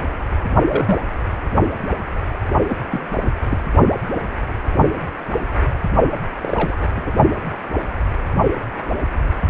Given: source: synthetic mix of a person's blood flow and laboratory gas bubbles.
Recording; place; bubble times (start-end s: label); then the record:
Doppler ultrasound of blood flow; precordium
0.69-0.97 s: bubbles
2.68-2.75 s: bubbles
2.91-3.01 s: bubbles
3.21-3.28 s: bubbles
3.49-3.58 s: bubbles
6.42-6.76 s: bubbles
6.81-6.89 s: bubbles
6.96-7.02 s: bubbles
7.05-7.12 s: bubbles
From the record:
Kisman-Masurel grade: 232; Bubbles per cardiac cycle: several, 3 to 8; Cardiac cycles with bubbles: 50 to 99%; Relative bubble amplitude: moderate (0.250 to 0.450); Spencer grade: 3 (all of the cardiac periods contain showers or single bubble signals, but not dominating or overriding the cardiac motion signals); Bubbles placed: only in the low amplitude regions of the cardiac cycle